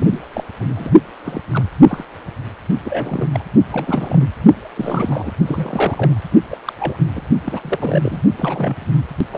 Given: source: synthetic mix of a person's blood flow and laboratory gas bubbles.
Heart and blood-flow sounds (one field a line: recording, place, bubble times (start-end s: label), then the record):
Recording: Doppler ultrasound of blood flow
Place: precordium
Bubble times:
0.00-0.19 s: bubbles
0.33-0.44 s: bubbles
0.60-0.92 s: bubbles
1.24-1.42 s: bubbles
1.53-1.64 s: bubbles
1.88-2.05 s: bubbles
2.85-3.29 s: bubbles
3.33-3.45 s: bubbles
3.72-4.28 s: bubbles
4.75-5.33 s: bubbles
5.46-6.20 s: bubbles
6.50-6.57 s: bubbles
6.65-6.73 s: bubbles
6.79-7.03 s: bubbles
7.15-7.22 s: bubbles
7.46-8.21 s: bubbles
8.38-8.75 s: bubbles
9.31-9.38 s: bubbles
From the record:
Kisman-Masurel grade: 242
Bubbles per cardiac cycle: several, 3 to 8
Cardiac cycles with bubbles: 100%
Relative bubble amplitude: moderate (0.250 to 0.450)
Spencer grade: 3 (all of the cardiac periods contain showers or single bubble signals, but not dominating or overriding the cardiac motion signals)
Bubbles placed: only in the low amplitude regions of the cardiac cycle